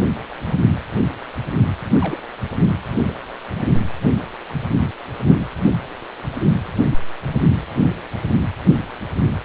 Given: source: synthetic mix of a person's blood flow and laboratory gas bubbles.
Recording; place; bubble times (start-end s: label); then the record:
Doppler ultrasound of blood flow; precordium
1.96-1.98 s: bubbles
2.01-2.19 s: bubbles
3.03-3.12 s: bubbles
3.58-3.66 s: bubbles
From the record:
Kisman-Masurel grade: 121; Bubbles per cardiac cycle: 1 to 2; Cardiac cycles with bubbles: 10 to 50%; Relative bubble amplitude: barely perceptible (0.100 to 0.250); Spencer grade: 2 (many but less than half of the cardiac periods contain bubble signals, singularly or in groups); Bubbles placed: anywhere in the cardiac cycle